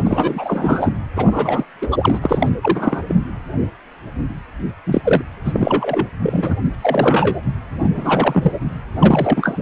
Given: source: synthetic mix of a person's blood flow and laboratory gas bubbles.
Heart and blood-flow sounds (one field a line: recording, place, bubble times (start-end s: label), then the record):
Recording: Doppler ultrasound of blood flow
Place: precordium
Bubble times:
0.00-0.92 s: bubbles
1.16-1.65 s: bubbles
1.81-1.88 s: bubbles
1.92-2.50 s: bubbles
2.61-3.02 s: bubbles
3.08-3.16 s: bubbles
4.87-5.01 s: bubbles
5.04-5.24 s: bubbles
5.45-6.07 s: bubbles
6.22-6.56 s: bubbles
6.74-6.75 s: bubbles
6.81-7.39 s: bubbles
7.83-7.89 s: bubbles
7.96-8.52 s: bubbles
8.99-9.62 s: bubbles
From the record:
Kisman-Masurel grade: 333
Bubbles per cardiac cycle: rolling drumbeat, 9 or more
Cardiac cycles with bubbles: 50 to 99%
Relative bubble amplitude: loud (0.450 to 0.775)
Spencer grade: 3 (all of the cardiac periods contain showers or single bubble signals, but not dominating or overriding the cardiac motion signals)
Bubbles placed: anywhere in the cardiac cycle